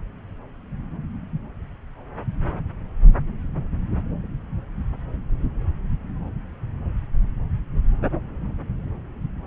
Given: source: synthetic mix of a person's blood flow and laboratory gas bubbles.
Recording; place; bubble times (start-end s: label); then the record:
Doppler ultrasound of blood flow; subclavian vein
no bubbles
From the record:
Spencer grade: 0 (complete lack of bubble signals)